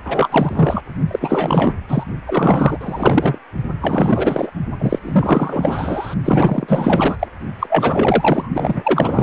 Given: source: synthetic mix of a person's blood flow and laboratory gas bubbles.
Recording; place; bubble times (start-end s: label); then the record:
Doppler ultrasound of blood flow; precordium
0.04-0.82 s: bubbles
1.10-1.73 s: bubbles
1.88-2.04 s: bubbles
2.25-2.78 s: bubbles
2.81-3.39 s: bubbles
3.81-4.50 s: bubbles
4.79-4.99 s: bubbles
5.04-6.15 s: bubbles
6.25-7.16 s: bubbles
7.19-7.27 s: bubbles
7.59-8.50 s: bubbles
8.54-9.23 s: bubbles
From the record:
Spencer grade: 4 (maximum detectable bubble signal sounding continuously throughout systole and diastole of every cardiac period, and overriding the amplitude of the normal cardiac signals); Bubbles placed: only in the low amplitude regions of the cardiac cycle